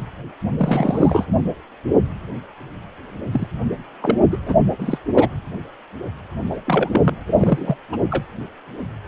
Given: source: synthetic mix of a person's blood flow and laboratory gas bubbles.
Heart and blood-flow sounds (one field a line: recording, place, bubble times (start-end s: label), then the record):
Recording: Doppler ultrasound of blood flow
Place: precordium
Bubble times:
0.00-0.02 s: bubbles
0.57-1.27 s: bubbles
3.31-3.47 s: bubbles
4.01-4.21 s: bubbles
4.32-4.38 s: bubbles
4.46-4.54 s: bubbles
4.79-4.99 s: bubbles
5.14-5.29 s: bubbles
6.49-6.60 s: bubbles
6.67-7.17 s: bubbles
7.27-7.76 s: bubbles
7.92-7.97 s: bubbles
8.11-8.25 s: bubbles
From the record:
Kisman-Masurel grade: 233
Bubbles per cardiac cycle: several, 3 to 8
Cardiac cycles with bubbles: 50 to 99%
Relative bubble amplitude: loud (0.450 to 0.775)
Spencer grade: 3 (all of the cardiac periods contain showers or single bubble signals, but not dominating or overriding the cardiac motion signals)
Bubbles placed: anywhere in the cardiac cycle